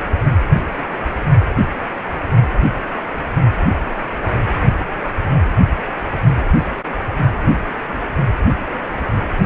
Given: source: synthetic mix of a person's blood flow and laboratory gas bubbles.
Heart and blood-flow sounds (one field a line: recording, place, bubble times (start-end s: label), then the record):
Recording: Doppler ultrasound of blood flow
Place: precordium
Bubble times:
no bubbles
From the record:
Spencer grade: 0 (complete lack of bubble signals)